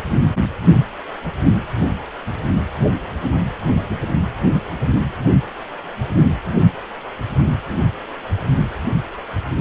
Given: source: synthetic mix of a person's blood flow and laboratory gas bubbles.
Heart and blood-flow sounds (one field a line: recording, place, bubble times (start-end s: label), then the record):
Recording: Doppler ultrasound of blood flow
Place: precordium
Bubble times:
no bubbles
From the record:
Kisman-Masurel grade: 000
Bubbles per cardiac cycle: 0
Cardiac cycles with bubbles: 0%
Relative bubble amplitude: no bubbles discernible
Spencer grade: 0 (complete lack of bubble signals)